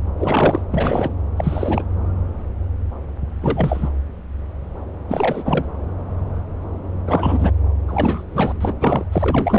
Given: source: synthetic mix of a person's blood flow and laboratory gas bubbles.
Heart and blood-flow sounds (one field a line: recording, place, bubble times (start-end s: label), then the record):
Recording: Doppler ultrasound of blood flow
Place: subclavian vein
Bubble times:
0.17-0.61 s: bubbles
0.70-1.13 s: bubbles
1.36-1.83 s: bubbles
3.41-3.90 s: bubbles
5.08-5.65 s: bubbles
7.06-7.52 s: bubbles
7.88-8.25 s: bubbles
8.30-8.53 s: bubbles
8.61-8.74 s: bubbles
8.80-9.05 s: bubbles
9.12-9.59 s: bubbles
From the record:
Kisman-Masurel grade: 333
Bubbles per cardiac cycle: rolling drumbeat, 9 or more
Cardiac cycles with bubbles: 50 to 99%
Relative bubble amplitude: loud (0.450 to 0.775)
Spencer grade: 3 (all of the cardiac periods contain showers or single bubble signals, but not dominating or overriding the cardiac motion signals)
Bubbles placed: anywhere in the cardiac cycle